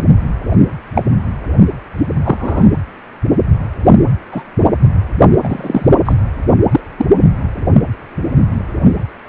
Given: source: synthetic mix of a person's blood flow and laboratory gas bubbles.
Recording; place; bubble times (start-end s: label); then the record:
Doppler ultrasound of blood flow; precordium
0.95-1.03 s: bubbles
2.24-2.67 s: bubbles
4.32-4.43 s: bubbles
5.43-5.95 s: bubbles
6.06-6.15 s: bubbles
6.71-6.81 s: bubbles
6.98-7.06 s: bubbles
From the record:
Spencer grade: 2 (many but less than half of the cardiac periods contain bubble signals, singularly or in groups); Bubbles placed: anywhere in the cardiac cycle